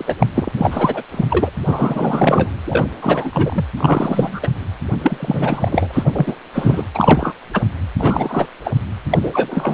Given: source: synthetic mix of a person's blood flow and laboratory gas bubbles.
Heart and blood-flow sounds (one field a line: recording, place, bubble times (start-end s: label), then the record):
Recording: Doppler ultrasound of blood flow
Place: precordium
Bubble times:
0.00-0.15 s: bubbles
0.20-0.27 s: bubbles
0.35-0.51 s: bubbles
0.57-1.02 s: bubbles
1.12-1.25 s: bubbles
1.29-1.50 s: bubbles
1.66-2.53 s: bubbles
2.66-2.89 s: bubbles
3.02-3.30 s: bubbles
3.33-3.65 s: bubbles
3.77-4.40 s: bubbles
4.42-4.49 s: bubbles
4.99-6.36 s: bubbles
6.54-6.88 s: bubbles
6.94-7.33 s: bubbles
7.53-7.62 s: bubbles
7.99-8.46 s: bubbles
8.64-8.73 s: bubbles
9.10-9.19 s: bubbles
9.22-9.74 s: bubbles
From the record:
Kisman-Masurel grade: 343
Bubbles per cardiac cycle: rolling drumbeat, 9 or more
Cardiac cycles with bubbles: 100%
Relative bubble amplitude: loud (0.450 to 0.775)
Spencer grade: 3 (all of the cardiac periods contain showers or single bubble signals, but not dominating or overriding the cardiac motion signals)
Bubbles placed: anywhere in the cardiac cycle